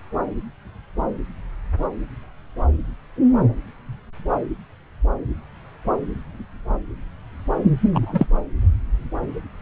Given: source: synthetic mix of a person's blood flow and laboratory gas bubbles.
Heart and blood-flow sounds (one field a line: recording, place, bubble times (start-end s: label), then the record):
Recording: Doppler ultrasound of blood flow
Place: subclavian vein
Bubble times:
7.93-8.27 s: bubbles
From the record:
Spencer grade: 1 (occasional bubble signal discernible with the cardiac motion signal, with majority of cardiac periods free of bubbles)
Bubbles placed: anywhere in the cardiac cycle